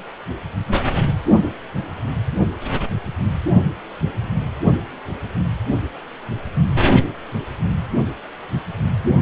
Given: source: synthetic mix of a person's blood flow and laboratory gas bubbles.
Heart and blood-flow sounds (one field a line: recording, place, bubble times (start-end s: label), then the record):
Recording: Doppler ultrasound of blood flow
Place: precordium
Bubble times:
no bubbles
From the record:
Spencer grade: 0 (complete lack of bubble signals)